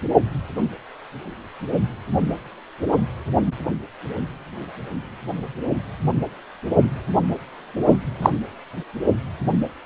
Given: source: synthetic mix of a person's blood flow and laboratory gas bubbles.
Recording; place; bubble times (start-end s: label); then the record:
Doppler ultrasound of blood flow; precordium
7.91-7.98 s: bubbles
8.22-8.30 s: bubbles
From the record:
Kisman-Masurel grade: 113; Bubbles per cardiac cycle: 1 to 2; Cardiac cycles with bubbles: 1 to 10%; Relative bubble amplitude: loud (0.450 to 0.775); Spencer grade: 1 (occasional bubble signal discernible with the cardiac motion signal, with majority of cardiac periods free of bubbles); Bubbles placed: only in the low amplitude regions of the cardiac cycle